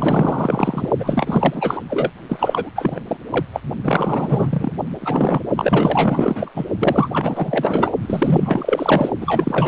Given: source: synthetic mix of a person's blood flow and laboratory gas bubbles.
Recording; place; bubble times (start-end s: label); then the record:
Doppler ultrasound of blood flow; precordium
0.00-0.90 s: bubbles
0.99-1.81 s: bubbles
1.90-2.11 s: bubbles
2.29-2.70 s: bubbles
2.75-3.00 s: bubbles
3.07-3.17 s: bubbles
3.30-3.45 s: bubbles
3.52-3.60 s: bubbles
3.83-4.72 s: bubbles
4.99-5.43 s: bubbles
5.57-6.52 s: bubbles
6.55-6.66 s: bubbles
6.79-7.08 s: bubbles
7.11-7.92 s: bubbles
8.02-9.10 s: bubbles
9.20-9.68 s: bubbles
From the record:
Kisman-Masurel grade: 444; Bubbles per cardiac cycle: continuous sound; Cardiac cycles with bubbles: 100%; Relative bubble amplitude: maximal (0.775 to 0.999); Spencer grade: 4 (maximum detectable bubble signal sounding continuously throughout systole and diastole of every cardiac period, and overriding the amplitude of the normal cardiac signals); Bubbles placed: only in the low amplitude regions of the cardiac cycle